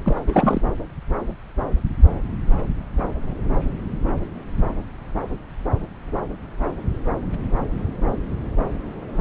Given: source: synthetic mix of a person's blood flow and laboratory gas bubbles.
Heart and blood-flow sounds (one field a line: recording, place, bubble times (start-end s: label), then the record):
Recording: Doppler ultrasound of blood flow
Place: subclavian vein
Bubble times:
0.05-0.21 s: bubbles
0.27-0.61 s: bubbles
From the record:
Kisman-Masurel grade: 212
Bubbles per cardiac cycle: several, 3 to 8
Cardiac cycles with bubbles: 1 to 10%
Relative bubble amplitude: moderate (0.250 to 0.450)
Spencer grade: 1 (occasional bubble signal discernible with the cardiac motion signal, with majority of cardiac periods free of bubbles)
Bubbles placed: anywhere in the cardiac cycle